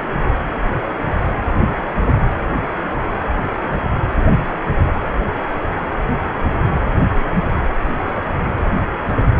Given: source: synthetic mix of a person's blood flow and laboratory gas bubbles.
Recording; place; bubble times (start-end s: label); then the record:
Doppler ultrasound of blood flow; precordium
no bubbles
From the record:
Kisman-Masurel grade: 000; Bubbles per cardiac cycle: 0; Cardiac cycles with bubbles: 0%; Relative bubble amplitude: no bubbles discernible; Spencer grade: 0 (complete lack of bubble signals)